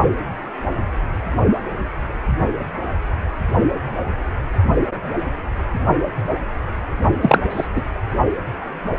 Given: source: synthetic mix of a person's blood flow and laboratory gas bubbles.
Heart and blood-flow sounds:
Doppler ultrasound of blood flow; precordium
7.21-7.39 s: bubbles
7.50-7.69 s: bubbles
7.75-7.81 s: bubbles
From the record:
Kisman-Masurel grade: 213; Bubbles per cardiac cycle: several, 3 to 8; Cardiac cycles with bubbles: 1 to 10%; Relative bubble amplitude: loud (0.450 to 0.775); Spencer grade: 1 (occasional bubble signal discernible with the cardiac motion signal, with majority of cardiac periods free of bubbles); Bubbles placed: only in the low amplitude regions of the cardiac cycle

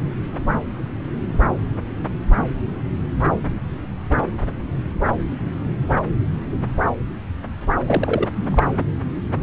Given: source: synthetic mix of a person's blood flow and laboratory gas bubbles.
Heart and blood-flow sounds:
Doppler ultrasound of blood flow; subclavian vein
7.87-8.27 s: bubbles
8.35-8.63 s: bubbles
From the record:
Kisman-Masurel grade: 213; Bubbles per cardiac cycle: several, 3 to 8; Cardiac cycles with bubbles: 1 to 10%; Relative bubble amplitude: loud (0.450 to 0.775); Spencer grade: 1 (occasional bubble signal discernible with the cardiac motion signal, with majority of cardiac periods free of bubbles); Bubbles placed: anywhere in the cardiac cycle

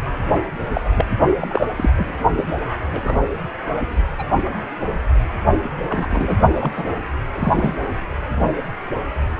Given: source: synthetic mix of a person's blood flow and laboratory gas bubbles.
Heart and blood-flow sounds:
Doppler ultrasound of blood flow; precordium
0.74-0.81 s: bubbles
0.85-0.89 s: bubbles
0.95-1.06 s: bubbles
1.40-1.67 s: bubbles
1.76-1.90 s: bubbles
1.96-2.15 s: bubbles
2.36-2.45 s: bubbles
2.93-3.00 s: bubbles
3.04-3.17 s: bubbles
4.19-4.26 s: bubbles
5.89-6.37 s: bubbles
6.54-6.71 s: bubbles
6.76-6.84 s: bubbles
7.35-7.75 s: bubbles
From the record:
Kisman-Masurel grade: 222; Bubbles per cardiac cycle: several, 3 to 8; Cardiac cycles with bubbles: 10 to 50%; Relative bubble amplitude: moderate (0.250 to 0.450); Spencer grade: 2 (many but less than half of the cardiac periods contain bubble signals, singularly or in groups); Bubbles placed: anywhere in the cardiac cycle

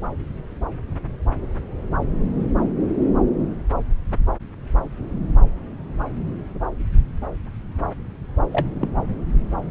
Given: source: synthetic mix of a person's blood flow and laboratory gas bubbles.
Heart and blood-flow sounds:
Doppler ultrasound of blood flow; subclavian vein
8.52-8.68 s: bubbles
8.81-8.89 s: bubbles
From the record:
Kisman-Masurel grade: 122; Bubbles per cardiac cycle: 1 to 2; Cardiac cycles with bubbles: 10 to 50%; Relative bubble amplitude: moderate (0.250 to 0.450); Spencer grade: 2 (many but less than half of the cardiac periods contain bubble signals, singularly or in groups); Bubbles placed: anywhere in the cardiac cycle

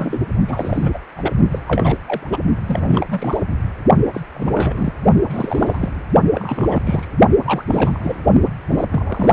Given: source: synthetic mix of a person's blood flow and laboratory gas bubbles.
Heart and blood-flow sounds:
Doppler ultrasound of blood flow; precordium
0.00-0.22 s: bubbles
0.48-0.99 s: bubbles
1.17-1.34 s: bubbles
1.51-1.60 s: bubbles
1.68-2.00 s: bubbles
2.04-2.37 s: bubbles
2.66-3.06 s: bubbles
3.10-3.42 s: bubbles
4.13-4.21 s: bubbles
4.35-4.93 s: bubbles
5.30-6.04 s: bubbles
6.34-6.83 s: bubbles
6.86-7.07 s: bubbles
7.46-7.63 s: bubbles
7.67-8.21 s: bubbles
8.68-8.85 s: bubbles
8.90-9.33 s: bubbles
From the record:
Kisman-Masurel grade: 342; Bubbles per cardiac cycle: rolling drumbeat, 9 or more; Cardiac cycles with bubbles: 100%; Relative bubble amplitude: moderate (0.250 to 0.450); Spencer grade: 3 (all of the cardiac periods contain showers or single bubble signals, but not dominating or overriding the cardiac motion signals); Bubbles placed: only in the low amplitude regions of the cardiac cycle

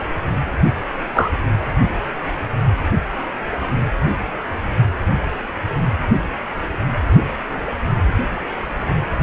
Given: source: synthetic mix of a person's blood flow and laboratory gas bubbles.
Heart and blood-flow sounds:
Doppler ultrasound of blood flow; precordium
1.14-1.30 s: bubbles
From the record:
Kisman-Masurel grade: 113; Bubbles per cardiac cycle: 1 to 2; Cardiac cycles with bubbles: 1 to 10%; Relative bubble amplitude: loud (0.450 to 0.775); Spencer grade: 1 (occasional bubble signal discernible with the cardiac motion signal, with majority of cardiac periods free of bubbles); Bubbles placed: anywhere in the cardiac cycle

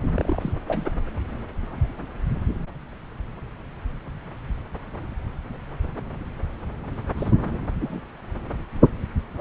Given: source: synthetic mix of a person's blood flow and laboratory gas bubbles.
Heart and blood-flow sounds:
Doppler ultrasound of blood flow; subclavian vein
0.14-0.53 s: bubbles
0.67-0.91 s: bubbles
7.17-7.36 s: bubbles
7.81-8.02 s: bubbles
From the record:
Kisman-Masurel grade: 221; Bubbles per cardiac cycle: several, 3 to 8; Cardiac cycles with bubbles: 10 to 50%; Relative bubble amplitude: barely perceptible (0.100 to 0.250); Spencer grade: 2 (many but less than half of the cardiac periods contain bubble signals, singularly or in groups); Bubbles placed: anywhere in the cardiac cycle

